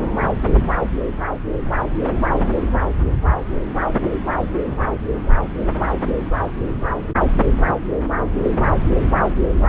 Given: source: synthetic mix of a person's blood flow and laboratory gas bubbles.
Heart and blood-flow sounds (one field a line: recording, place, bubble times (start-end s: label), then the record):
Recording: Doppler ultrasound of blood flow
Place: subclavian vein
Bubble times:
no bubbles
From the record:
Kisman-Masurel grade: 000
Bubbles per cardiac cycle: 0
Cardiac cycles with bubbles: 0%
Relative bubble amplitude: no bubbles discernible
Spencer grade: 0 (complete lack of bubble signals)